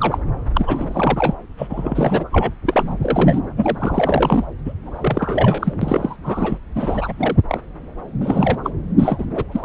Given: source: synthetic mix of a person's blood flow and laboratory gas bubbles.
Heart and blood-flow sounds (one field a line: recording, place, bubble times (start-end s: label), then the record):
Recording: Doppler ultrasound of blood flow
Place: subclavian vein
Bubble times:
0.00-0.18 s: bubbles
0.54-1.34 s: bubbles
1.57-2.25 s: bubbles
2.32-2.52 s: bubbles
2.67-2.94 s: bubbles
3.01-3.40 s: bubbles
3.57-4.45 s: bubbles
4.65-4.72 s: bubbles
4.86-5.73 s: bubbles
5.81-6.16 s: bubbles
6.23-6.58 s: bubbles
6.75-7.41 s: bubbles
7.48-7.61 s: bubbles
8.21-8.57 s: bubbles
8.63-8.71 s: bubbles
8.97-9.25 s: bubbles
9.35-9.44 s: bubbles
9.52-9.65 s: bubbles
From the record:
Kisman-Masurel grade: 342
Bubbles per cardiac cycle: rolling drumbeat, 9 or more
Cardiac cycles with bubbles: 100%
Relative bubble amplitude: moderate (0.250 to 0.450)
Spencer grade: 3 (all of the cardiac periods contain showers or single bubble signals, but not dominating or overriding the cardiac motion signals)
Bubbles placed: anywhere in the cardiac cycle